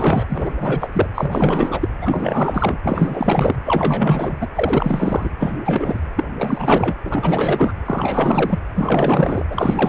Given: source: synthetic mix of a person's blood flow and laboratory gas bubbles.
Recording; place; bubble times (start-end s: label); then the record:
Doppler ultrasound of blood flow; precordium
0.00-0.25 s: bubbles
0.29-0.53 s: bubbles
0.57-0.89 s: bubbles
0.92-1.07 s: bubbles
1.15-1.89 s: bubbles
2.01-2.80 s: bubbles
2.84-3.56 s: bubbles
3.65-4.36 s: bubbles
4.40-4.48 s: bubbles
4.55-5.29 s: bubbles
5.39-5.62 s: bubbles
5.65-6.06 s: bubbles
6.16-6.24 s: bubbles
6.38-6.96 s: bubbles
7.04-7.74 s: bubbles
7.85-8.60 s: bubbles
8.75-9.45 s: bubbles
9.50-9.89 s: bubbles
From the record:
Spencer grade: 4 (maximum detectable bubble signal sounding continuously throughout systole and diastole of every cardiac period, and overriding the amplitude of the normal cardiac signals); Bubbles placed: anywhere in the cardiac cycle